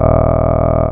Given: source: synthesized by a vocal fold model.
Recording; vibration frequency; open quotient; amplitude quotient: sustained vowel; 40 Hz; 0.3; 1.1